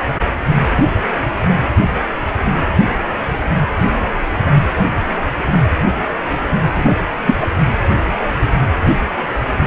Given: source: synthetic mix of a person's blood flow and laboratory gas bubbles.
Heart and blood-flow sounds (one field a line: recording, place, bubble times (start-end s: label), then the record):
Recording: Doppler ultrasound of blood flow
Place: precordium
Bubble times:
6.75-6.94 s: bubbles
7.27-7.34 s: bubbles
7.40-7.47 s: bubbles
From the record:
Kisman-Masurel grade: 213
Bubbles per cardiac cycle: several, 3 to 8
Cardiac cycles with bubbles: 1 to 10%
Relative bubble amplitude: loud (0.450 to 0.775)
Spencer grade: 1 (occasional bubble signal discernible with the cardiac motion signal, with majority of cardiac periods free of bubbles)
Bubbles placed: anywhere in the cardiac cycle